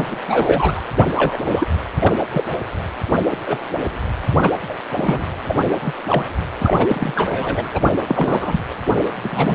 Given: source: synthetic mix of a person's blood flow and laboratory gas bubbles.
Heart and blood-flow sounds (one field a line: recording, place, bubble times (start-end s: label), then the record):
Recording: Doppler ultrasound of blood flow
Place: precordium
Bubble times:
0.00-0.05 s: bubbles
0.10-0.16 s: bubbles
0.28-0.81 s: bubbles
0.97-1.04 s: bubbles
1.17-1.68 s: bubbles
1.99-2.17 s: bubbles
2.30-2.44 s: bubbles
3.29-3.37 s: bubbles
3.45-3.62 s: bubbles
4.42-4.51 s: bubbles
4.68-4.75 s: bubbles
4.96-5.25 s: bubbles
5.47-5.56 s: bubbles
5.80-5.93 s: bubbles
6.08-6.23 s: bubbles
6.60-7.70 s: bubbles
7.74-7.81 s: bubbles
8.06-8.62 s: bubbles
9.20-9.55 s: bubbles
From the record:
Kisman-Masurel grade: 242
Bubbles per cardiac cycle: several, 3 to 8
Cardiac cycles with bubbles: 100%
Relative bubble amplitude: moderate (0.250 to 0.450)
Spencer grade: 3 (all of the cardiac periods contain showers or single bubble signals, but not dominating or overriding the cardiac motion signals)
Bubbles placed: anywhere in the cardiac cycle